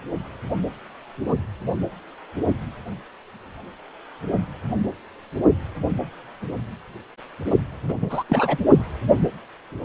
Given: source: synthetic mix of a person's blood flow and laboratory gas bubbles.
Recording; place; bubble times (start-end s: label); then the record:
Doppler ultrasound of blood flow; precordium
7.88-7.95 s: bubbles
8.01-8.23 s: bubbles
8.29-8.57 s: bubbles
From the record:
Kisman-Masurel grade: 222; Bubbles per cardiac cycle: several, 3 to 8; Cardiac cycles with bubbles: 10 to 50%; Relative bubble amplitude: moderate (0.250 to 0.450); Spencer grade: 2 (many but less than half of the cardiac periods contain bubble signals, singularly or in groups); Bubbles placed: anywhere in the cardiac cycle